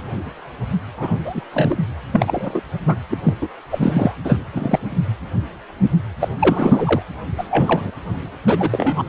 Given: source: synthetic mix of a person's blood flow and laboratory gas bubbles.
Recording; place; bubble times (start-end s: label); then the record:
Doppler ultrasound of blood flow; precordium
0.97-1.17 s: bubbles
1.24-1.41 s: bubbles
1.54-1.77 s: bubbles
2.12-2.62 s: bubbles
2.87-2.96 s: bubbles
3.10-3.17 s: bubbles
3.23-3.33 s: bubbles
3.41-3.48 s: bubbles
3.70-4.12 s: bubbles
4.24-4.37 s: bubbles
4.53-4.79 s: bubbles
6.20-6.29 s: bubbles
6.40-7.03 s: bubbles
7.37-7.44 s: bubbles
7.48-7.90 s: bubbles
8.46-9.03 s: bubbles
From the record:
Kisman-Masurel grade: 232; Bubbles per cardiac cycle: several, 3 to 8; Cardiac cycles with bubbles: 50 to 99%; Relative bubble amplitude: moderate (0.250 to 0.450); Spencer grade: 3 (all of the cardiac periods contain showers or single bubble signals, but not dominating or overriding the cardiac motion signals); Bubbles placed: anywhere in the cardiac cycle